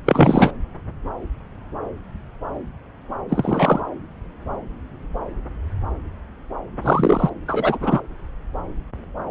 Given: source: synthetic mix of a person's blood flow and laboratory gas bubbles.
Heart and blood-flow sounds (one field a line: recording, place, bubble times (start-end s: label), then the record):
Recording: Doppler ultrasound of blood flow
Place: subclavian vein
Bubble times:
0.05-0.52 s: bubbles
3.29-3.80 s: bubbles
6.82-7.29 s: bubbles
7.47-8.01 s: bubbles
From the record:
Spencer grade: 2 (many but less than half of the cardiac periods contain bubble signals, singularly or in groups)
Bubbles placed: anywhere in the cardiac cycle